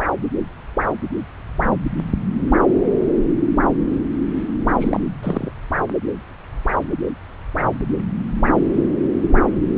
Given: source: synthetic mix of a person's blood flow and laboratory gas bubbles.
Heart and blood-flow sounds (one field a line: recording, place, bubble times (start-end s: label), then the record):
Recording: Doppler ultrasound of blood flow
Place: subclavian vein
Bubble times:
4.80-5.00 s: bubbles
5.22-5.51 s: bubbles
From the record:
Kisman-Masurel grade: 212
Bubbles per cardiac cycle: several, 3 to 8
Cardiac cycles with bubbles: 1 to 10%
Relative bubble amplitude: moderate (0.250 to 0.450)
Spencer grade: 1 (occasional bubble signal discernible with the cardiac motion signal, with majority of cardiac periods free of bubbles)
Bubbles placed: anywhere in the cardiac cycle